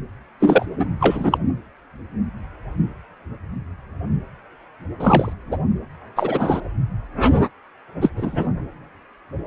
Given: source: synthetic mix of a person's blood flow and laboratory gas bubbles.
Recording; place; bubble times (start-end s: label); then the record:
Doppler ultrasound of blood flow; precordium
0.40-0.66 s: bubbles
0.79-0.86 s: bubbles
1.00-1.38 s: bubbles
5.00-5.33 s: bubbles
5.51-5.58 s: bubbles
6.16-6.60 s: bubbles
8.01-8.10 s: bubbles
8.16-8.48 s: bubbles
From the record:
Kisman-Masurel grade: 223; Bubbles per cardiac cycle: several, 3 to 8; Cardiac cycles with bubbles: 10 to 50%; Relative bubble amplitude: loud (0.450 to 0.775); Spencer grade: 2 (many but less than half of the cardiac periods contain bubble signals, singularly or in groups); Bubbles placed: anywhere in the cardiac cycle